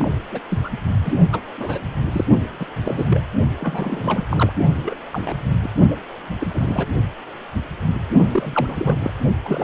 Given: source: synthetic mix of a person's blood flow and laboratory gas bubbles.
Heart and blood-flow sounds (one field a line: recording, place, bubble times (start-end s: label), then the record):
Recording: Doppler ultrasound of blood flow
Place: precordium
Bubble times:
0.00-0.08 s: bubbles
0.31-0.40 s: bubbles
0.49-0.61 s: bubbles
0.64-0.69 s: bubbles
1.04-1.15 s: bubbles
1.32-1.41 s: bubbles
1.58-1.79 s: bubbles
2.12-2.25 s: bubbles
2.59-2.67 s: bubbles
2.81-3.21 s: bubbles
3.60-4.27 s: bubbles
4.30-4.52 s: bubbles
4.72-4.96 s: bubbles
5.12-5.37 s: bubbles
5.62-5.69 s: bubbles
5.90-5.96 s: bubbles
6.40-6.87 s: bubbles
8.31-9.12 s: bubbles
9.43-9.64 s: bubbles
From the record:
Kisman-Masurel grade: 232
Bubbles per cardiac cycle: several, 3 to 8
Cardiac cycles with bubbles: 50 to 99%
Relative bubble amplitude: moderate (0.250 to 0.450)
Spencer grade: 3 (all of the cardiac periods contain showers or single bubble signals, but not dominating or overriding the cardiac motion signals)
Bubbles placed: only in the low amplitude regions of the cardiac cycle